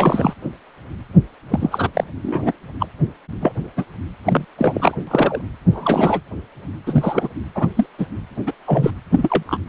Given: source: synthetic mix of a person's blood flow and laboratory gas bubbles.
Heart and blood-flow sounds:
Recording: Doppler ultrasound of blood flow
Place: precordium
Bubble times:
0.00-0.33 s: bubbles
1.48-1.90 s: bubbles
1.94-2.04 s: bubbles
2.23-2.52 s: bubbles
2.79-2.86 s: bubbles
3.40-3.52 s: bubbles
3.76-3.85 s: bubbles
4.24-4.45 s: bubbles
4.58-4.96 s: bubbles
5.07-5.41 s: bubbles
5.71-6.20 s: bubbles
6.86-7.28 s: bubbles
7.54-7.68 s: bubbles
7.76-7.86 s: bubbles
7.98-8.06 s: bubbles
8.46-8.53 s: bubbles
8.66-8.90 s: bubbles
9.12-9.42 s: bubbles
9.46-9.59 s: bubbles
From the record:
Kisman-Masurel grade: 233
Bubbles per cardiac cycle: several, 3 to 8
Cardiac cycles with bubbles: 50 to 99%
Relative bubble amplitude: loud (0.450 to 0.775)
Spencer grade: 3 (all of the cardiac periods contain showers or single bubble signals, but not dominating or overriding the cardiac motion signals)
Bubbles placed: anywhere in the cardiac cycle

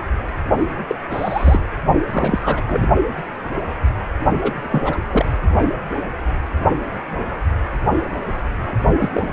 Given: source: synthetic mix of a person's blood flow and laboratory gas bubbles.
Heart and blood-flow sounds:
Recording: Doppler ultrasound of blood flow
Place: precordium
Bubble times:
0.87-0.95 s: bubbles
1.11-1.60 s: bubbles
2.12-2.64 s: bubbles
2.67-2.87 s: bubbles
4.42-4.54 s: bubbles
4.59-5.00 s: bubbles
5.11-5.25 s: bubbles
8.98-9.33 s: bubbles
From the record:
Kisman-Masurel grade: 232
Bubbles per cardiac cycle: several, 3 to 8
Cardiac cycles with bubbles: 50 to 99%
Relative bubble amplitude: moderate (0.250 to 0.450)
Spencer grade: 3 (all of the cardiac periods contain showers or single bubble signals, but not dominating or overriding the cardiac motion signals)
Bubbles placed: only in the low amplitude regions of the cardiac cycle

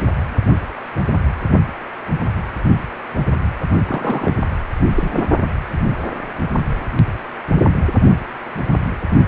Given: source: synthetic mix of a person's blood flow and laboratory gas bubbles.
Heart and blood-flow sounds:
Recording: Doppler ultrasound of blood flow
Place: precordium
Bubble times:
3.88-4.35 s: bubbles
4.95-5.28 s: bubbles
From the record:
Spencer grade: 1 (occasional bubble signal discernible with the cardiac motion signal, with majority of cardiac periods free of bubbles)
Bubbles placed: only in the low amplitude regions of the cardiac cycle

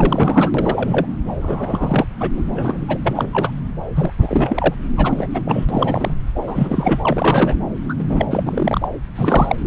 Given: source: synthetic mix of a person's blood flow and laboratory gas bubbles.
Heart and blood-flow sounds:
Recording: Doppler ultrasound of blood flow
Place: subclavian vein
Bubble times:
0.00-0.51 s: bubbles
0.54-1.06 s: bubbles
1.41-2.06 s: bubbles
2.20-2.31 s: bubbles
2.36-2.44 s: bubbles
2.47-2.98 s: bubbles
3.03-3.53 s: bubbles
3.96-4.12 s: bubbles
4.19-4.75 s: bubbles
4.97-5.28 s: bubbles
5.33-5.42 s: bubbles
5.45-5.65 s: bubbles
5.68-6.14 s: bubbles
6.35-7.54 s: bubbles
7.88-7.94 s: bubbles
7.98-8.28 s: bubbles
8.30-8.88 s: bubbles
9.15-9.55 s: bubbles
From the record:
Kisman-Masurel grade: 343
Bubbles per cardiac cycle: rolling drumbeat, 9 or more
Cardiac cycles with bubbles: 100%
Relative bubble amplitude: loud (0.450 to 0.775)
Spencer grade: 3 (all of the cardiac periods contain showers or single bubble signals, but not dominating or overriding the cardiac motion signals)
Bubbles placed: anywhere in the cardiac cycle

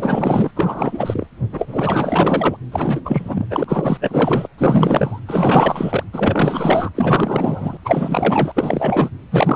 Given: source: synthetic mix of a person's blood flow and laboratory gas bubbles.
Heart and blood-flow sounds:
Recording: Doppler ultrasound of blood flow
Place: precordium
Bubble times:
0.00-0.52 s: bubbles
0.55-1.27 s: bubbles
1.51-2.56 s: bubbles
2.72-3.01 s: bubbles
3.04-3.47 s: bubbles
3.50-3.65 s: bubbles
3.67-3.98 s: bubbles
4.00-4.47 s: bubbles
4.58-5.20 s: bubbles
5.26-6.03 s: bubbles
6.12-6.89 s: bubbles
6.94-7.77 s: bubbles
7.84-9.10 s: bubbles
9.30-9.55 s: bubbles
From the record:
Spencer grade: 4 (maximum detectable bubble signal sounding continuously throughout systole and diastole of every cardiac period, and overriding the amplitude of the normal cardiac signals)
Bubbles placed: anywhere in the cardiac cycle

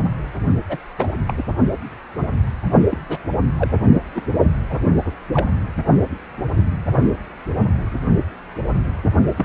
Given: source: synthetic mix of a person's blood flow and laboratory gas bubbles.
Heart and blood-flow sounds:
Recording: Doppler ultrasound of blood flow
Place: precordium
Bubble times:
0.69-0.77 s: bubbles
0.99-1.12 s: bubbles
1.27-1.43 s: bubbles
2.90-2.97 s: bubbles
3.09-3.18 s: bubbles
3.57-3.71 s: bubbles
4.15-4.22 s: bubbles
4.70-4.79 s: bubbles
5.04-5.11 s: bubbles
5.33-5.50 s: bubbles
5.77-5.83 s: bubbles
9.38-9.45 s: bubbles
From the record:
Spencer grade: 2 (many but less than half of the cardiac periods contain bubble signals, singularly or in groups)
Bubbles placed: only in the low amplitude regions of the cardiac cycle

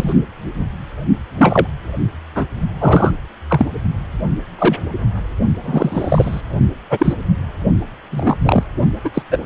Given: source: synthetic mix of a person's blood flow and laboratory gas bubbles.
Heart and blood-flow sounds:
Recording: Doppler ultrasound of blood flow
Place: precordium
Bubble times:
0.00-0.14 s: bubbles
1.37-1.67 s: bubbles
2.35-2.46 s: bubbles
2.79-3.11 s: bubbles
3.49-3.67 s: bubbles
4.58-4.76 s: bubbles
5.62-6.41 s: bubbles
6.90-7.13 s: bubbles
8.11-8.36 s: bubbles
8.44-8.63 s: bubbles
9.04-9.10 s: bubbles
9.14-9.23 s: bubbles
9.31-9.38 s: bubbles
From the record:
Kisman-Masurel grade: 233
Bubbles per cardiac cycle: several, 3 to 8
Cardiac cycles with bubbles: 50 to 99%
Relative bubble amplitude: loud (0.450 to 0.775)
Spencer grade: 3 (all of the cardiac periods contain showers or single bubble signals, but not dominating or overriding the cardiac motion signals)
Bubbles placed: only in the low amplitude regions of the cardiac cycle

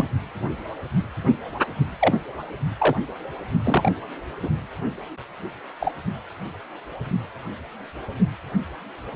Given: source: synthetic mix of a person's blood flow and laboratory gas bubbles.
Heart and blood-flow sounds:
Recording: Doppler ultrasound of blood flow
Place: precordium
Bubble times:
0.00-0.05 s: bubbles
2.00-2.14 s: bubbles
2.78-2.96 s: bubbles
3.64-3.91 s: bubbles
4.42-4.50 s: bubbles
5.80-5.94 s: bubbles
From the record:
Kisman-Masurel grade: 122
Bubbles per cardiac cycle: 1 to 2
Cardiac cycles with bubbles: 10 to 50%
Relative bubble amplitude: moderate (0.250 to 0.450)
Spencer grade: 2 (many but less than half of the cardiac periods contain bubble signals, singularly or in groups)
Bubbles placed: only in the low amplitude regions of the cardiac cycle

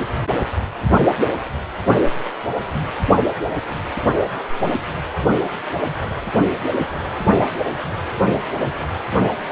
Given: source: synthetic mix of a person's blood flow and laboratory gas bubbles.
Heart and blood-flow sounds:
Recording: Doppler ultrasound of blood flow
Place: precordium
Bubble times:
6.71-6.77 s: bubbles
From the record:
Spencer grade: 1 (occasional bubble signal discernible with the cardiac motion signal, with majority of cardiac periods free of bubbles)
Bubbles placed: only in the low amplitude regions of the cardiac cycle

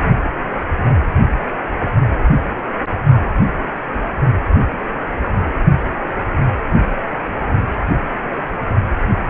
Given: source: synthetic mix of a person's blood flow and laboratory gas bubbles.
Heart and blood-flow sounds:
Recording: Doppler ultrasound of blood flow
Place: precordium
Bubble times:
no bubbles
From the record:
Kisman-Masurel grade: 000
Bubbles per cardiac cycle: 0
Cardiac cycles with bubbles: 0%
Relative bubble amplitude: no bubbles discernible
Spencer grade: 0 (complete lack of bubble signals)

